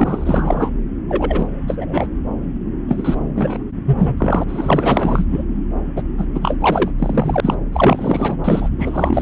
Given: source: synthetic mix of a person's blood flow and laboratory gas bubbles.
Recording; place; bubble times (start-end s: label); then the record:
Doppler ultrasound of blood flow; subclavian vein
0.00-0.70 s: bubbles
1.08-1.48 s: bubbles
1.67-2.10 s: bubbles
2.88-3.15 s: bubbles
3.35-3.65 s: bubbles
3.85-4.44 s: bubbles
4.48-5.25 s: bubbles
5.30-5.44 s: bubbles
5.96-6.02 s: bubbles
6.17-6.26 s: bubbles
6.34-6.57 s: bubbles
6.60-6.90 s: bubbles
6.98-7.55 s: bubbles
7.72-8.38 s: bubbles
8.44-8.70 s: bubbles
8.79-9.22 s: bubbles
From the record:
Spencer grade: 4 (maximum detectable bubble signal sounding continuously throughout systole and diastole of every cardiac period, and overriding the amplitude of the normal cardiac signals); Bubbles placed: anywhere in the cardiac cycle